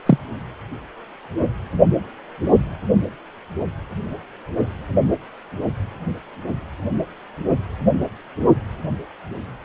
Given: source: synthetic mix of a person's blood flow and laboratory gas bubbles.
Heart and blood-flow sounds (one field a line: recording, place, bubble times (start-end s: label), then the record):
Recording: Doppler ultrasound of blood flow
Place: precordium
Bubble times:
0.05-0.18 s: bubbles
From the record:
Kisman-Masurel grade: 113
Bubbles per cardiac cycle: 1 to 2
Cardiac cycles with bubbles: 1 to 10%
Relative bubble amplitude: loud (0.450 to 0.775)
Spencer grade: 1 (occasional bubble signal discernible with the cardiac motion signal, with majority of cardiac periods free of bubbles)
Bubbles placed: anywhere in the cardiac cycle